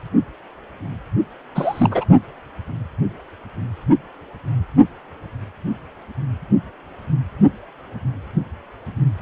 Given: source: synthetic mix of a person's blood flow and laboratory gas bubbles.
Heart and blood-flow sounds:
Doppler ultrasound of blood flow; precordium
1.55-2.05 s: bubbles
From the record:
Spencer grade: 1 (occasional bubble signal discernible with the cardiac motion signal, with majority of cardiac periods free of bubbles); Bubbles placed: only in the low amplitude regions of the cardiac cycle

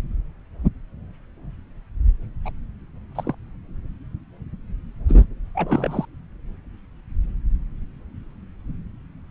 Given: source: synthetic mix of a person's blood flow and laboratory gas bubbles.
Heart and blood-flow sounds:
Doppler ultrasound of blood flow; subclavian vein
2.45-2.51 s: bubbles
3.15-3.35 s: bubbles
5.08-5.25 s: bubbles
5.54-6.05 s: bubbles
From the record:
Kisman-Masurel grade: 222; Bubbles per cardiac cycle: several, 3 to 8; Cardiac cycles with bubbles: 10 to 50%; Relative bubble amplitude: moderate (0.250 to 0.450); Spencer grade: 2 (many but less than half of the cardiac periods contain bubble signals, singularly or in groups); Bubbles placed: anywhere in the cardiac cycle

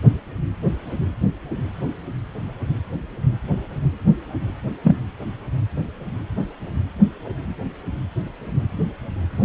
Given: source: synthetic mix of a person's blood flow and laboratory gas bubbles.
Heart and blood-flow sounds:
Doppler ultrasound of blood flow; precordium
4.83-4.96 s: bubbles
From the record:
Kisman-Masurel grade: 113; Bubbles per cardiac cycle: 1 to 2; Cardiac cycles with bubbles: 1 to 10%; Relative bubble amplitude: loud (0.450 to 0.775); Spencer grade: 1 (occasional bubble signal discernible with the cardiac motion signal, with majority of cardiac periods free of bubbles); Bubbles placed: anywhere in the cardiac cycle

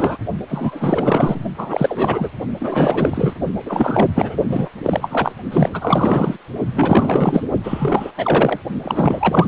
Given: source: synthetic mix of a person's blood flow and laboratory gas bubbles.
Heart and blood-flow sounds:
Doppler ultrasound of blood flow; precordium
0.00-0.17 s: bubbles
0.48-1.44 s: bubbles
1.58-2.29 s: bubbles
2.60-3.33 s: bubbles
3.66-4.37 s: bubbles
4.48-4.69 s: bubbles
4.83-5.33 s: bubbles
5.51-5.70 s: bubbles
5.73-6.37 s: bubbles
6.74-7.44 s: bubbles
7.63-8.12 s: bubbles
8.17-8.59 s: bubbles
8.82-9.47 s: bubbles
From the record:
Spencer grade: 4 (maximum detectable bubble signal sounding continuously throughout systole and diastole of every cardiac period, and overriding the amplitude of the normal cardiac signals); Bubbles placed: only in the low amplitude regions of the cardiac cycle

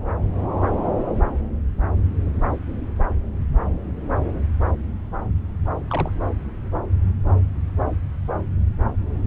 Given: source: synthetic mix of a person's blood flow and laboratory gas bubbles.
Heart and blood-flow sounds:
Doppler ultrasound of blood flow; subclavian vein
5.88-6.10 s: bubbles
From the record:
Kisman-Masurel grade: 111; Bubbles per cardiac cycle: 1 to 2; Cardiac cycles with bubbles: 1 to 10%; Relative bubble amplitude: barely perceptible (0.100 to 0.250); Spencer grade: 1 (occasional bubble signal discernible with the cardiac motion signal, with majority of cardiac periods free of bubbles); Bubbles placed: anywhere in the cardiac cycle

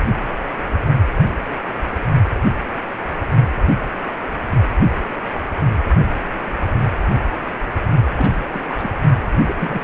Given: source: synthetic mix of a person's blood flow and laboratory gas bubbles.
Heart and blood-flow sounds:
Doppler ultrasound of blood flow; precordium
8.17-8.30 s: bubbles
8.41-8.46 s: bubbles
8.53-8.63 s: bubbles
8.68-8.90 s: bubbles
9.46-9.84 s: bubbles
From the record:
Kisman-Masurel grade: 221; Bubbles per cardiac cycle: several, 3 to 8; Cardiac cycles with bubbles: 10 to 50%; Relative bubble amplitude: barely perceptible (0.100 to 0.250); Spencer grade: 2 (many but less than half of the cardiac periods contain bubble signals, singularly or in groups); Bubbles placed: only in the low amplitude regions of the cardiac cycle

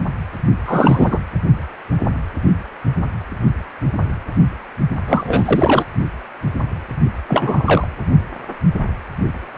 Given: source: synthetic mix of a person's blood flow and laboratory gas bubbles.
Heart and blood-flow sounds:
Doppler ultrasound of blood flow; precordium
0.66-1.18 s: bubbles
5.08-5.85 s: bubbles
7.28-7.88 s: bubbles
From the record:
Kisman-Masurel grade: 223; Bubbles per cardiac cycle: several, 3 to 8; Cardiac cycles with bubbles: 10 to 50%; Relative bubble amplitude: loud (0.450 to 0.775); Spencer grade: 2 (many but less than half of the cardiac periods contain bubble signals, singularly or in groups); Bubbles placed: only in the low amplitude regions of the cardiac cycle

